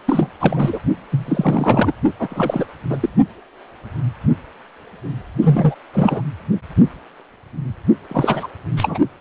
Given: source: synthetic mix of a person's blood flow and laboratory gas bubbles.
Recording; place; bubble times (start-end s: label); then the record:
Doppler ultrasound of blood flow; precordium
0.05-0.30 s: bubbles
0.39-0.80 s: bubbles
1.11-1.93 s: bubbles
2.19-2.66 s: bubbles
2.90-3.10 s: bubbles
5.42-5.75 s: bubbles
5.93-6.22 s: bubbles
8.09-8.47 s: bubbles
8.76-8.99 s: bubbles
From the record:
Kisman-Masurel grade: 333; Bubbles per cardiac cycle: rolling drumbeat, 9 or more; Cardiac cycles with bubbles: 50 to 99%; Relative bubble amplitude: loud (0.450 to 0.775); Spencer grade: 3 (all of the cardiac periods contain showers or single bubble signals, but not dominating or overriding the cardiac motion signals); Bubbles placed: only in the low amplitude regions of the cardiac cycle